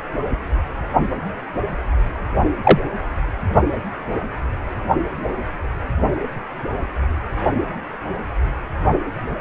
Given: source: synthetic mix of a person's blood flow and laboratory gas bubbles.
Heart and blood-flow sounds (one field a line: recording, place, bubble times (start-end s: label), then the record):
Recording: Doppler ultrasound of blood flow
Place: precordium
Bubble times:
2.63-2.79 s: bubbles
From the record:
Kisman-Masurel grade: 113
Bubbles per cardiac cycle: 1 to 2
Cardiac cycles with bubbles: 1 to 10%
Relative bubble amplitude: loud (0.450 to 0.775)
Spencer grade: 1 (occasional bubble signal discernible with the cardiac motion signal, with majority of cardiac periods free of bubbles)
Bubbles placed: only in the low amplitude regions of the cardiac cycle